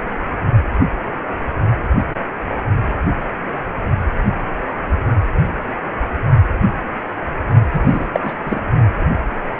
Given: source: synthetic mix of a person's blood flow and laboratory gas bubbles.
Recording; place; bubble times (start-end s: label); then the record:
Doppler ultrasound of blood flow; precordium
7.72-8.10 s: bubbles
8.13-8.20 s: bubbles
8.23-8.35 s: bubbles
8.44-8.61 s: bubbles
From the record:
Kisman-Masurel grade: 213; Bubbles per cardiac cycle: several, 3 to 8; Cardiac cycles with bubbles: 1 to 10%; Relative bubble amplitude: loud (0.450 to 0.775); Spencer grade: 1 (occasional bubble signal discernible with the cardiac motion signal, with majority of cardiac periods free of bubbles); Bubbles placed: only in the low amplitude regions of the cardiac cycle